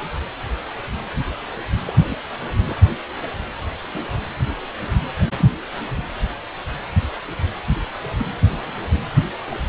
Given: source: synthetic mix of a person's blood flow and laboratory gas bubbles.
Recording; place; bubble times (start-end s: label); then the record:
Doppler ultrasound of blood flow; precordium
1.85-1.93 s: bubbles
2.08-2.18 s: bubbles
2.67-2.77 s: bubbles
3.00-3.04 s: bubbles
3.08-3.13 s: bubbles
3.15-3.30 s: bubbles
3.87-4.03 s: bubbles
5.38-5.49 s: bubbles
5.96-6.03 s: bubbles
8.57-8.73 s: bubbles
9.16-9.23 s: bubbles
9.50-9.65 s: bubbles
From the record:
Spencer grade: 2 (many but less than half of the cardiac periods contain bubble signals, singularly or in groups); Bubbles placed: anywhere in the cardiac cycle